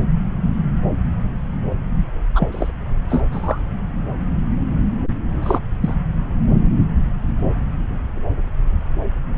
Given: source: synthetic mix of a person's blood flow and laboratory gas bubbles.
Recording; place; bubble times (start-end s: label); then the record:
Doppler ultrasound of blood flow; subclavian vein
2.35-2.48 s: bubbles
2.52-2.71 s: bubbles
3.09-3.23 s: bubbles
3.31-3.61 s: bubbles
5.42-5.59 s: bubbles
5.82-5.93 s: bubbles
From the record:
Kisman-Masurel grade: 222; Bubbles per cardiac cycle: several, 3 to 8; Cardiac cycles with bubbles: 10 to 50%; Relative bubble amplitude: moderate (0.250 to 0.450); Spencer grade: 2 (many but less than half of the cardiac periods contain bubble signals, singularly or in groups); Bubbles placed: anywhere in the cardiac cycle